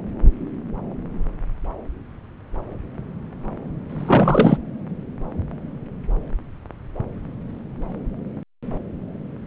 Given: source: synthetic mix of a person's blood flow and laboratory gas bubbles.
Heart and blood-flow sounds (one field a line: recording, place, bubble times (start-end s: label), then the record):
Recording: Doppler ultrasound of blood flow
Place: subclavian vein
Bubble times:
3.90-4.57 s: bubbles
From the record:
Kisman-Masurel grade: 213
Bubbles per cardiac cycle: several, 3 to 8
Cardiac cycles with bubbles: 1 to 10%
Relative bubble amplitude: loud (0.450 to 0.775)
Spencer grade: 1 (occasional bubble signal discernible with the cardiac motion signal, with majority of cardiac periods free of bubbles)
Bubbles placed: anywhere in the cardiac cycle